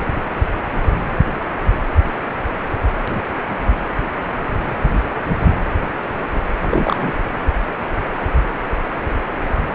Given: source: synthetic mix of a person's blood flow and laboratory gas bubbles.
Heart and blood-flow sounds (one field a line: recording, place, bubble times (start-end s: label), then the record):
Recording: Doppler ultrasound of blood flow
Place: precordium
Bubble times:
6.61-7.12 s: bubbles
From the record:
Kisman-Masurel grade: 113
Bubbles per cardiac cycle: 1 to 2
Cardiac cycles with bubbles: 1 to 10%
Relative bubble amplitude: loud (0.450 to 0.775)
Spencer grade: 1 (occasional bubble signal discernible with the cardiac motion signal, with majority of cardiac periods free of bubbles)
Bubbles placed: anywhere in the cardiac cycle